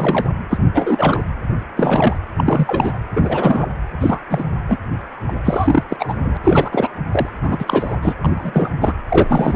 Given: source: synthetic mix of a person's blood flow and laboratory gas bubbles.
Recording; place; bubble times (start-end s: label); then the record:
Doppler ultrasound of blood flow; precordium
0.00-0.29 s: bubbles
0.50-0.58 s: bubbles
0.74-1.24 s: bubbles
1.76-2.18 s: bubbles
2.37-2.98 s: bubbles
3.16-3.69 s: bubbles
4.00-4.20 s: bubbles
4.29-4.45 s: bubbles
4.69-4.78 s: bubbles
5.28-5.33 s: bubbles
5.45-5.83 s: bubbles
5.88-6.15 s: bubbles
6.24-6.37 s: bubbles
6.44-6.88 s: bubbles
7.11-7.29 s: bubbles
7.42-7.96 s: bubbles
8.02-8.14 s: bubbles
8.22-8.70 s: bubbles
8.80-8.94 s: bubbles
9.10-9.55 s: bubbles
From the record:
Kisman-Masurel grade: 343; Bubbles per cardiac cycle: rolling drumbeat, 9 or more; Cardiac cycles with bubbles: 100%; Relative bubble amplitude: loud (0.450 to 0.775); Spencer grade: 3 (all of the cardiac periods contain showers or single bubble signals, but not dominating or overriding the cardiac motion signals); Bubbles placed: anywhere in the cardiac cycle